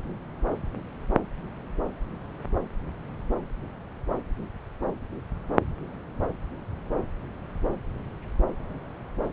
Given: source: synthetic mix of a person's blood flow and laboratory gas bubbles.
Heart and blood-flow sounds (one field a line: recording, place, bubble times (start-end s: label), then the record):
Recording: Doppler ultrasound of blood flow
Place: subclavian vein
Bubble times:
no bubbles
From the record:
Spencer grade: 0 (complete lack of bubble signals)